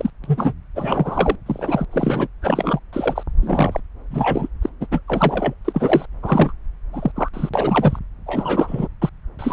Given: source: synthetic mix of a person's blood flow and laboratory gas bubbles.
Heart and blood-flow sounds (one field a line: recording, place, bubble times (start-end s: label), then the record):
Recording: Doppler ultrasound of blood flow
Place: subclavian vein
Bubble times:
0.00-0.10 s: bubbles
0.23-0.53 s: bubbles
0.75-1.35 s: bubbles
1.46-1.85 s: bubbles
1.91-2.28 s: bubbles
2.42-2.79 s: bubbles
2.92-3.24 s: bubbles
3.42-3.80 s: bubbles
4.10-4.48 s: bubbles
4.61-4.69 s: bubbles
4.80-4.87 s: bubbles
4.91-5.01 s: bubbles
5.08-5.54 s: bubbles
5.64-6.05 s: bubbles
6.22-6.52 s: bubbles
6.92-7.12 s: bubbles
7.15-7.30 s: bubbles
7.33-7.49 s: bubbles
7.54-7.99 s: bubbles
8.26-8.88 s: bubbles
9.02-9.10 s: bubbles
9.38-9.53 s: bubbles
From the record:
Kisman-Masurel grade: 243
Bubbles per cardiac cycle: several, 3 to 8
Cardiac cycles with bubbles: 100%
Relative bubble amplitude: loud (0.450 to 0.775)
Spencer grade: 3 (all of the cardiac periods contain showers or single bubble signals, but not dominating or overriding the cardiac motion signals)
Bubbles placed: anywhere in the cardiac cycle